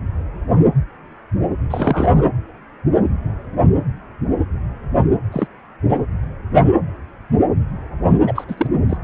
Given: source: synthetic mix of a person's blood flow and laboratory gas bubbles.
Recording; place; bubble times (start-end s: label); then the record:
Doppler ultrasound of blood flow; precordium
1.70-2.23 s: bubbles
5.32-5.47 s: bubbles
5.89-5.98 s: bubbles
8.26-8.45 s: bubbles
8.48-8.67 s: bubbles
8.89-8.97 s: bubbles
From the record:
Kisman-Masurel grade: 222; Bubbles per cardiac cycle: several, 3 to 8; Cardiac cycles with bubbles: 10 to 50%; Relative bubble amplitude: moderate (0.250 to 0.450); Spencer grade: 2 (many but less than half of the cardiac periods contain bubble signals, singularly or in groups); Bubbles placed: anywhere in the cardiac cycle